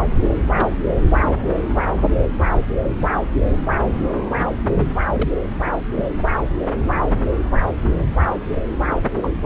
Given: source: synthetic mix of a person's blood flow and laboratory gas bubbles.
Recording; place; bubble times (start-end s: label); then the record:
Doppler ultrasound of blood flow; subclavian vein
0.22-0.28 s: bubbles
0.54-0.73 s: bubbles
5.12-5.30 s: bubbles
5.51-5.80 s: bubbles
5.91-6.03 s: bubbles
8.85-9.00 s: bubbles
9.22-9.30 s: bubbles
From the record:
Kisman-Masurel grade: 121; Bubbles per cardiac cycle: 1 to 2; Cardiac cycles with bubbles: 10 to 50%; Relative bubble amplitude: barely perceptible (0.100 to 0.250); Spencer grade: 2 (many but less than half of the cardiac periods contain bubble signals, singularly or in groups); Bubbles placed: anywhere in the cardiac cycle